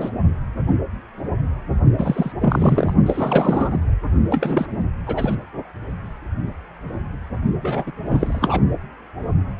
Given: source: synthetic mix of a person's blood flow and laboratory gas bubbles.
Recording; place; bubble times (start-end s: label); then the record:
Doppler ultrasound of blood flow; precordium
0.00-0.11 s: bubbles
1.98-2.32 s: bubbles
2.41-2.94 s: bubbles
3.06-3.77 s: bubbles
4.30-4.67 s: bubbles
5.06-5.35 s: bubbles
7.62-7.92 s: bubbles
8.05-8.61 s: bubbles
From the record:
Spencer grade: 3 (all of the cardiac periods contain showers or single bubble signals, but not dominating or overriding the cardiac motion signals); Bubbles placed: only in the low amplitude regions of the cardiac cycle